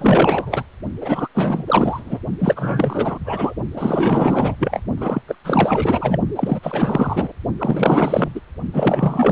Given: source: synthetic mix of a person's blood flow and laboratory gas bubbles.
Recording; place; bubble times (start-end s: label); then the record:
Doppler ultrasound of blood flow; precordium
0.00-0.63 s: bubbles
1.01-1.29 s: bubbles
1.34-1.65 s: bubbles
1.67-2.19 s: bubbles
2.38-3.19 s: bubbles
3.25-3.54 s: bubbles
3.74-4.55 s: bubbles
4.59-4.83 s: bubbles
4.97-5.22 s: bubbles
5.27-5.35 s: bubbles
5.44-6.18 s: bubbles
6.35-6.59 s: bubbles
6.62-7.33 s: bubbles
7.58-8.32 s: bubbles
8.35-8.40 s: bubbles
8.73-9.31 s: bubbles
From the record:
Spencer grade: 4 (maximum detectable bubble signal sounding continuously throughout systole and diastole of every cardiac period, and overriding the amplitude of the normal cardiac signals); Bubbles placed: only in the low amplitude regions of the cardiac cycle